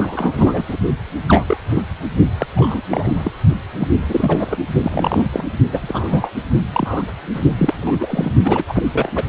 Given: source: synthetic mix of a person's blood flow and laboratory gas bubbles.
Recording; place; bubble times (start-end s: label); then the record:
Doppler ultrasound of blood flow; precordium
0.00-0.63 s: bubbles
0.68-0.77 s: bubbles
1.27-1.57 s: bubbles
1.69-1.83 s: bubbles
2.38-2.47 s: bubbles
2.54-2.81 s: bubbles
2.90-3.32 s: bubbles
3.79-3.88 s: bubbles
4.08-4.57 s: bubbles
4.83-5.25 s: bubbles
5.30-5.45 s: bubbles
5.73-6.30 s: bubbles
6.73-7.04 s: bubbles
7.34-7.40 s: bubbles
7.58-8.31 s: bubbles
8.43-8.64 s: bubbles
8.67-8.82 s: bubbles
8.93-9.10 s: bubbles
9.15-9.24 s: bubbles
From the record:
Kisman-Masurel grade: 232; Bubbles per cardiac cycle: several, 3 to 8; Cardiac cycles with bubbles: 50 to 99%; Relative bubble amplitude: moderate (0.250 to 0.450); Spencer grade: 3 (all of the cardiac periods contain showers or single bubble signals, but not dominating or overriding the cardiac motion signals); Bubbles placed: only in the low amplitude regions of the cardiac cycle